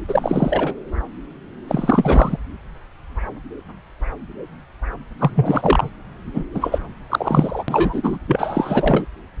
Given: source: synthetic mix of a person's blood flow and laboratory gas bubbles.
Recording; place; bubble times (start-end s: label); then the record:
Doppler ultrasound of blood flow; subclavian vein
0.08-0.75 s: bubbles
1.68-2.37 s: bubbles
5.19-5.90 s: bubbles
6.33-6.44 s: bubbles
6.54-6.80 s: bubbles
7.09-7.64 s: bubbles
7.68-8.18 s: bubbles
8.27-9.05 s: bubbles
From the record:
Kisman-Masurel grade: 333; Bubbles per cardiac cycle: rolling drumbeat, 9 or more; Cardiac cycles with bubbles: 50 to 99%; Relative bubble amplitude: loud (0.450 to 0.775); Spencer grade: 3 (all of the cardiac periods contain showers or single bubble signals, but not dominating or overriding the cardiac motion signals); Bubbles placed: anywhere in the cardiac cycle